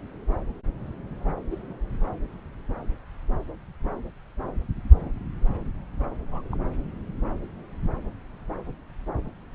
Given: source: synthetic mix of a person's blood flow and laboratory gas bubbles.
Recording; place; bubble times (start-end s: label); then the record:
Doppler ultrasound of blood flow; subclavian vein
1.20-1.33 s: bubbles
1.50-1.58 s: bubbles
1.70-1.74 s: bubbles
6.31-6.41 s: bubbles
6.52-6.56 s: bubbles
From the record:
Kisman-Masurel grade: 121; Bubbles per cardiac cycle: 1 to 2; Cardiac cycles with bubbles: 10 to 50%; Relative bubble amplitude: barely perceptible (0.100 to 0.250); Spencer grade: 2 (many but less than half of the cardiac periods contain bubble signals, singularly or in groups); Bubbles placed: anywhere in the cardiac cycle